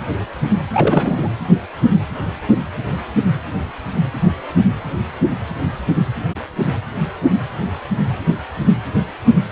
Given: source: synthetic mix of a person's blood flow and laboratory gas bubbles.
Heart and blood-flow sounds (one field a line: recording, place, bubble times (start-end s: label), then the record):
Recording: Doppler ultrasound of blood flow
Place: precordium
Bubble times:
0.73-1.28 s: bubbles
From the record:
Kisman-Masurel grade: 212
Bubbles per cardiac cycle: several, 3 to 8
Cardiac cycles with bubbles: 1 to 10%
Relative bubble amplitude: moderate (0.250 to 0.450)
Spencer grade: 1 (occasional bubble signal discernible with the cardiac motion signal, with majority of cardiac periods free of bubbles)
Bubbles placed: anywhere in the cardiac cycle